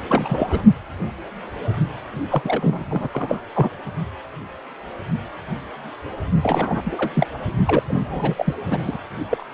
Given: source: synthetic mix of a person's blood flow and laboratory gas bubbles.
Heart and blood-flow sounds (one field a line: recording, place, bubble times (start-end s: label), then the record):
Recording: Doppler ultrasound of blood flow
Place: precordium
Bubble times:
0.08-0.63 s: bubbles
2.29-2.85 s: bubbles
2.90-3.08 s: bubbles
3.12-3.42 s: bubbles
3.55-3.69 s: bubbles
6.42-6.82 s: bubbles
6.84-7.26 s: bubbles
7.66-7.83 s: bubbles
7.87-8.55 s: bubbles
8.71-8.99 s: bubbles
9.31-9.45 s: bubbles
From the record:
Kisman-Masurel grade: 332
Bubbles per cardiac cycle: rolling drumbeat, 9 or more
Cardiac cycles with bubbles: 50 to 99%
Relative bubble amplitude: moderate (0.250 to 0.450)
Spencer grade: 3 (all of the cardiac periods contain showers or single bubble signals, but not dominating or overriding the cardiac motion signals)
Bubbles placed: only in the low amplitude regions of the cardiac cycle